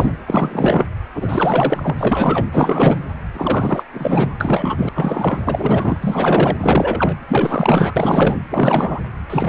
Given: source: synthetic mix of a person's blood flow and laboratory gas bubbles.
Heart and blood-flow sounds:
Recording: Doppler ultrasound of blood flow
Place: precordium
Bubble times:
0.00-0.17 s: bubbles
0.26-0.86 s: bubbles
1.14-1.93 s: bubbles
1.97-2.46 s: bubbles
2.53-3.04 s: bubbles
3.33-3.84 s: bubbles
3.93-4.33 s: bubbles
4.40-4.89 s: bubbles
4.95-5.97 s: bubbles
6.01-6.57 s: bubbles
6.59-7.16 s: bubbles
7.28-8.37 s: bubbles
8.50-9.01 s: bubbles
9.29-9.49 s: bubbles
From the record:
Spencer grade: 4 (maximum detectable bubble signal sounding continuously throughout systole and diastole of every cardiac period, and overriding the amplitude of the normal cardiac signals)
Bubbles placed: anywhere in the cardiac cycle

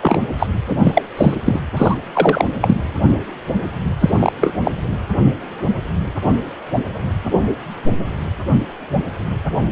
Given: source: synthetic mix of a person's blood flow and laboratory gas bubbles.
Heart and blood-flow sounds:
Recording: Doppler ultrasound of blood flow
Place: precordium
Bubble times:
0.02-0.18 s: bubbles
0.39-0.46 s: bubbles
0.70-0.77 s: bubbles
0.83-1.02 s: bubbles
1.17-1.35 s: bubbles
1.45-1.59 s: bubbles
1.76-1.97 s: bubbles
2.14-2.45 s: bubbles
2.61-2.77 s: bubbles
4.00-4.33 s: bubbles
4.41-4.54 s: bubbles
4.64-4.71 s: bubbles
From the record:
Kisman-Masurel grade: 223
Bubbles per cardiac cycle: several, 3 to 8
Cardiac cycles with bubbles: 10 to 50%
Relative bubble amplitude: loud (0.450 to 0.775)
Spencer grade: 2 (many but less than half of the cardiac periods contain bubble signals, singularly or in groups)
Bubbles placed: anywhere in the cardiac cycle

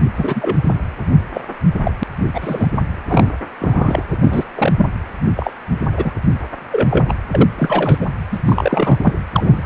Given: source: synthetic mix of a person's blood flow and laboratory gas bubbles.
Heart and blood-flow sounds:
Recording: Doppler ultrasound of blood flow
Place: precordium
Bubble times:
0.17-0.59 s: bubbles
0.64-0.76 s: bubbles
1.33-1.42 s: bubbles
1.83-1.91 s: bubbles
1.99-2.04 s: bubbles
2.34-2.72 s: bubbles
3.08-3.32 s: bubbles
3.60-4.04 s: bubbles
4.11-4.17 s: bubbles
4.19-4.44 s: bubbles
4.57-4.73 s: bubbles
4.77-4.87 s: bubbles
5.36-5.52 s: bubbles
5.96-6.12 s: bubbles
6.71-7.06 s: bubbles
7.08-7.15 s: bubbles
7.32-7.49 s: bubbles
7.58-7.98 s: bubbles
8.00-8.06 s: bubbles
8.31-8.39 s: bubbles
8.46-8.98 s: bubbles
9.03-9.13 s: bubbles
9.32-9.66 s: bubbles
From the record:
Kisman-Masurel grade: 243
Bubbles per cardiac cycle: several, 3 to 8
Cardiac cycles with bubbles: 100%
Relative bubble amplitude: loud (0.450 to 0.775)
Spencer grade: 3 (all of the cardiac periods contain showers or single bubble signals, but not dominating or overriding the cardiac motion signals)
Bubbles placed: anywhere in the cardiac cycle

